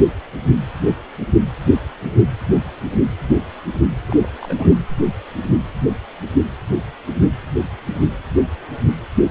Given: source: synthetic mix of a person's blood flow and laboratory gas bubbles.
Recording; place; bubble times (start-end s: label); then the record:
Doppler ultrasound of blood flow; precordium
4.07-4.26 s: bubbles
4.41-4.79 s: bubbles
From the record:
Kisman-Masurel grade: 211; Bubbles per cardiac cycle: several, 3 to 8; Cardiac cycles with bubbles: 1 to 10%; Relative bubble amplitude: barely perceptible (0.100 to 0.250); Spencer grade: 1 (occasional bubble signal discernible with the cardiac motion signal, with majority of cardiac periods free of bubbles); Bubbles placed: anywhere in the cardiac cycle